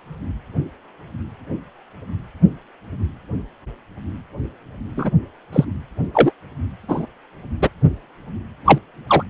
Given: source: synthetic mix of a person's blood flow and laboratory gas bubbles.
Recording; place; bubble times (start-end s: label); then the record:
Doppler ultrasound of blood flow; precordium
4.96-5.11 s: bubbles
5.53-5.65 s: bubbles
6.14-6.32 s: bubbles
6.88-7.06 s: bubbles
7.62-7.69 s: bubbles
8.65-8.78 s: bubbles
9.07-9.23 s: bubbles
From the record:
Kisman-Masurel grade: 123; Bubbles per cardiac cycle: 1 to 2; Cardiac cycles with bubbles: 10 to 50%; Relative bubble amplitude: loud (0.450 to 0.775); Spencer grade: 2 (many but less than half of the cardiac periods contain bubble signals, singularly or in groups); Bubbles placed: anywhere in the cardiac cycle